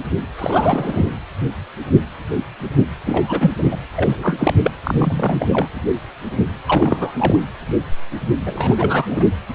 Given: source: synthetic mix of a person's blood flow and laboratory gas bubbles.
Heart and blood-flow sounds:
Doppler ultrasound of blood flow; precordium
0.38-1.10 s: bubbles
3.06-3.51 s: bubbles
3.58-3.77 s: bubbles
3.96-4.54 s: bubbles
4.58-4.72 s: bubbles
4.83-5.48 s: bubbles
5.53-5.67 s: bubbles
6.66-7.44 s: bubbles
8.46-9.07 s: bubbles
9.10-9.25 s: bubbles
From the record:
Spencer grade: 3 (all of the cardiac periods contain showers or single bubble signals, but not dominating or overriding the cardiac motion signals); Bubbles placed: anywhere in the cardiac cycle

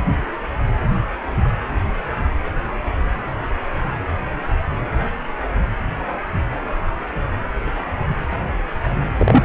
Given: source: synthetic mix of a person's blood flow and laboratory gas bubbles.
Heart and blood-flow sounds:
Doppler ultrasound of blood flow; precordium
9.19-9.45 s: bubbles
From the record:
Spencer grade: 1 (occasional bubble signal discernible with the cardiac motion signal, with majority of cardiac periods free of bubbles); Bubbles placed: anywhere in the cardiac cycle

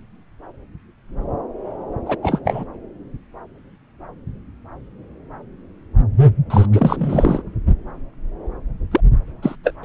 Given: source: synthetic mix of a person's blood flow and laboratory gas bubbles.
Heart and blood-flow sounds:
Doppler ultrasound of blood flow; subclavian vein
2.06-2.16 s: bubbles
2.23-2.39 s: bubbles
2.44-2.63 s: bubbles
6.50-6.66 s: bubbles
6.73-7.43 s: bubbles
8.91-9.00 s: bubbles
9.42-9.55 s: bubbles
9.64-9.74 s: bubbles
From the record:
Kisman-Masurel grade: 223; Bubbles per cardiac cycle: several, 3 to 8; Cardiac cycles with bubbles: 10 to 50%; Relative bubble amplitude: loud (0.450 to 0.775); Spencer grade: 2 (many but less than half of the cardiac periods contain bubble signals, singularly or in groups); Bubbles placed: anywhere in the cardiac cycle

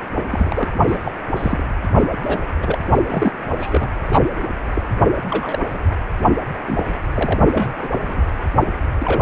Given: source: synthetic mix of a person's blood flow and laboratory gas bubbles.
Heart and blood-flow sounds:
Doppler ultrasound of blood flow; precordium
0.30-0.76 s: bubbles
0.87-1.12 s: bubbles
1.36-1.65 s: bubbles
2.23-2.47 s: bubbles
2.61-2.78 s: bubbles
2.92-2.99 s: bubbles
3.08-3.32 s: bubbles
3.59-3.88 s: bubbles
4.12-4.24 s: bubbles
4.42-4.48 s: bubbles
4.74-4.82 s: bubbles
5.29-5.58 s: bubbles
5.69-5.78 s: bubbles
6.66-6.83 s: bubbles
7.14-7.40 s: bubbles
7.54-7.69 s: bubbles
7.81-7.88 s: bubbles
7.96-8.21 s: bubbles
8.67-8.72 s: bubbles
8.99-9.22 s: bubbles
From the record:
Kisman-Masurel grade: 242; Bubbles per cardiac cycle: several, 3 to 8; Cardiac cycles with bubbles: 100%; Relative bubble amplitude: moderate (0.250 to 0.450); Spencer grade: 3 (all of the cardiac periods contain showers or single bubble signals, but not dominating or overriding the cardiac motion signals); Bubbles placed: only in the low amplitude regions of the cardiac cycle

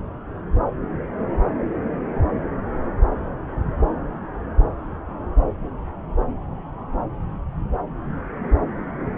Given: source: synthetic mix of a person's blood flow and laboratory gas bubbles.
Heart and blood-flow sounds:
Doppler ultrasound of blood flow; subclavian vein
no bubbles
From the record:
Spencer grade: 0 (complete lack of bubble signals)

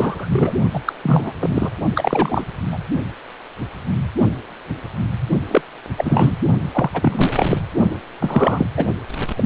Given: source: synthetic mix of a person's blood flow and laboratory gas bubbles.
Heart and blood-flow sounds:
Doppler ultrasound of blood flow; precordium
0.00-0.54 s: bubbles
0.73-0.80 s: bubbles
0.85-0.93 s: bubbles
1.03-1.32 s: bubbles
1.40-1.70 s: bubbles
1.95-2.44 s: bubbles
2.70-2.78 s: bubbles
5.47-5.62 s: bubbles
5.97-6.35 s: bubbles
6.72-6.90 s: bubbles
6.93-7.56 s: bubbles
8.20-8.66 s: bubbles
8.77-8.85 s: bubbles
9.36-9.45 s: bubbles
From the record:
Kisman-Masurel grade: 333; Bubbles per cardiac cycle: rolling drumbeat, 9 or more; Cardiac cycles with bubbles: 50 to 99%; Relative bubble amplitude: loud (0.450 to 0.775); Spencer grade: 3 (all of the cardiac periods contain showers or single bubble signals, but not dominating or overriding the cardiac motion signals); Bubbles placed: only in the low amplitude regions of the cardiac cycle

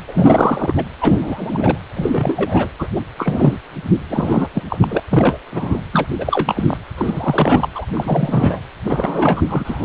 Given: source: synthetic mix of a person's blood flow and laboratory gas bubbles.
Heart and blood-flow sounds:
Doppler ultrasound of blood flow; precordium
0.07-0.73 s: bubbles
0.76-0.84 s: bubbles
1.01-1.78 s: bubbles
1.96-2.69 s: bubbles
2.79-2.88 s: bubbles
2.96-3.01 s: bubbles
3.18-3.58 s: bubbles
4.09-4.47 s: bubbles
4.54-4.62 s: bubbles
4.69-4.78 s: bubbles
4.81-5.00 s: bubbles
5.10-5.37 s: bubbles
5.51-5.81 s: bubbles
5.92-6.06 s: bubbles
6.18-6.77 s: bubbles
6.97-7.68 s: bubbles
7.75-7.86 s: bubbles
7.93-8.60 s: bubbles
8.84-9.85 s: bubbles
From the record:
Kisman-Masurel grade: 343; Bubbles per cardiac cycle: rolling drumbeat, 9 or more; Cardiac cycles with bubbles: 100%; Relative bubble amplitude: loud (0.450 to 0.775); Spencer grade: 3 (all of the cardiac periods contain showers or single bubble signals, but not dominating or overriding the cardiac motion signals); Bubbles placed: anywhere in the cardiac cycle

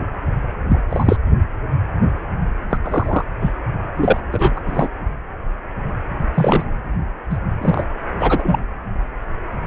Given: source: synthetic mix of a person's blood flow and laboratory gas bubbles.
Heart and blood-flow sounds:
Doppler ultrasound of blood flow; precordium
0.69-0.81 s: bubbles
0.90-1.16 s: bubbles
2.70-2.77 s: bubbles
2.83-3.25 s: bubbles
3.40-3.52 s: bubbles
3.96-4.21 s: bubbles
4.31-4.60 s: bubbles
4.66-4.88 s: bubbles
6.34-6.63 s: bubbles
7.29-7.38 s: bubbles
7.61-7.84 s: bubbles
8.19-8.64 s: bubbles
From the record:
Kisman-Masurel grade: 233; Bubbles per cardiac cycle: several, 3 to 8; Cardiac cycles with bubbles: 50 to 99%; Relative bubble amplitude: loud (0.450 to 0.775); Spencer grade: 3 (all of the cardiac periods contain showers or single bubble signals, but not dominating or overriding the cardiac motion signals); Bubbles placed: only in the low amplitude regions of the cardiac cycle

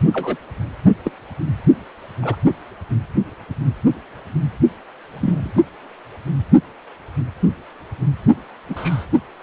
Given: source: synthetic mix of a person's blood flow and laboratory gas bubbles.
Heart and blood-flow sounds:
Doppler ultrasound of blood flow; precordium
0.13-0.36 s: bubbles
1.04-1.11 s: bubbles
2.21-2.36 s: bubbles
5.12-5.52 s: bubbles
8.69-9.05 s: bubbles
From the record:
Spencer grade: 2 (many but less than half of the cardiac periods contain bubble signals, singularly or in groups); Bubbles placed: only in the low amplitude regions of the cardiac cycle

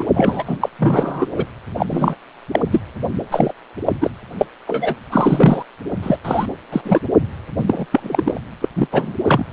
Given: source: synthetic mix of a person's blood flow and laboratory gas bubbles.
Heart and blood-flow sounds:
Doppler ultrasound of blood flow; precordium
0.00-0.03 s: bubbles
0.15-0.43 s: bubbles
0.46-0.57 s: bubbles
0.60-0.69 s: bubbles
0.78-1.27 s: bubbles
1.35-1.45 s: bubbles
1.77-1.86 s: bubbles
1.90-2.16 s: bubbles
2.51-2.59 s: bubbles
2.70-2.81 s: bubbles
3.31-3.53 s: bubbles
3.85-3.93 s: bubbles
4.01-4.11 s: bubbles
4.39-4.46 s: bubbles
4.67-4.96 s: bubbles
5.12-5.62 s: bubbles
6.03-6.18 s: bubbles
6.25-6.46 s: bubbles
6.72-6.82 s: bubbles
6.84-7.00 s: bubbles
7.58-7.64 s: bubbles
7.67-7.85 s: bubbles
7.92-8.39 s: bubbles
8.61-8.69 s: bubbles
8.75-8.88 s: bubbles
8.91-9.13 s: bubbles
9.25-9.44 s: bubbles
From the record:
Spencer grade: 3 (all of the cardiac periods contain showers or single bubble signals, but not dominating or overriding the cardiac motion signals); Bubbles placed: anywhere in the cardiac cycle

